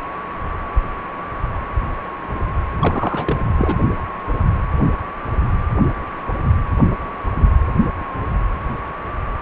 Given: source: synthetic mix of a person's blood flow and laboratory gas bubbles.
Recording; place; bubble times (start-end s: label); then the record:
Doppler ultrasound of blood flow; precordium
2.79-3.40 s: bubbles
3.57-3.76 s: bubbles
From the record:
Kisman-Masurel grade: 212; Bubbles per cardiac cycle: several, 3 to 8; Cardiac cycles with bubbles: 1 to 10%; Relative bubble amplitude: moderate (0.250 to 0.450); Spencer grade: 1 (occasional bubble signal discernible with the cardiac motion signal, with majority of cardiac periods free of bubbles); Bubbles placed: anywhere in the cardiac cycle